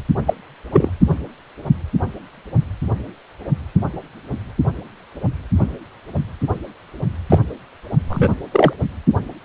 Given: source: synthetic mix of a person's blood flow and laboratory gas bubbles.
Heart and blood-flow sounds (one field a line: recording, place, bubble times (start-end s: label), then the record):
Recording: Doppler ultrasound of blood flow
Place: precordium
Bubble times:
0.27-0.33 s: bubbles
0.72-0.90 s: bubbles
7.29-7.39 s: bubbles
8.09-8.34 s: bubbles
8.51-8.73 s: bubbles
From the record:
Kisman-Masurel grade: 123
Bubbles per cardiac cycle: 1 to 2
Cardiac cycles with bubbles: 10 to 50%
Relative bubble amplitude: loud (0.450 to 0.775)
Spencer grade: 2 (many but less than half of the cardiac periods contain bubble signals, singularly or in groups)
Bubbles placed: only in the low amplitude regions of the cardiac cycle